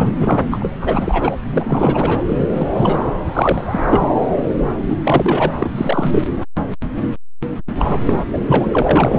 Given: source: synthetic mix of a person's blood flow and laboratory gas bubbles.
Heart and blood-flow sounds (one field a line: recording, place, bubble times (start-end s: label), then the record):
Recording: Doppler ultrasound of blood flow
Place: subclavian vein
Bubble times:
0.00-0.14 s: bubbles
0.19-0.40 s: bubbles
0.50-0.70 s: bubbles
0.80-1.35 s: bubbles
1.53-2.20 s: bubbles
2.30-2.67 s: bubbles
2.75-3.02 s: bubbles
3.26-3.79 s: bubbles
3.86-4.10 s: bubbles
4.88-4.96 s: bubbles
5.04-5.51 s: bubbles
5.58-5.70 s: bubbles
5.75-6.22 s: bubbles
7.79-8.02 s: bubbles
8.06-8.13 s: bubbles
8.32-9.19 s: bubbles
From the record:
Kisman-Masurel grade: 333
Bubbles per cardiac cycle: rolling drumbeat, 9 or more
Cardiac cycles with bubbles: 50 to 99%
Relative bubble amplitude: loud (0.450 to 0.775)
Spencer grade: 3 (all of the cardiac periods contain showers or single bubble signals, but not dominating or overriding the cardiac motion signals)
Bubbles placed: anywhere in the cardiac cycle